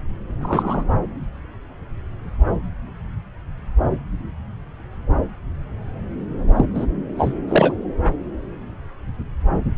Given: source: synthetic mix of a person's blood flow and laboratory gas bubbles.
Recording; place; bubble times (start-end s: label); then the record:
Doppler ultrasound of blood flow; subclavian vein
0.40-0.83 s: bubbles
6.56-6.67 s: bubbles
6.75-6.86 s: bubbles
7.19-7.34 s: bubbles
7.48-7.73 s: bubbles
From the record:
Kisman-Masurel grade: 213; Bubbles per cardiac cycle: several, 3 to 8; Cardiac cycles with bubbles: 1 to 10%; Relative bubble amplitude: loud (0.450 to 0.775); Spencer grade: 1 (occasional bubble signal discernible with the cardiac motion signal, with majority of cardiac periods free of bubbles); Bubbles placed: anywhere in the cardiac cycle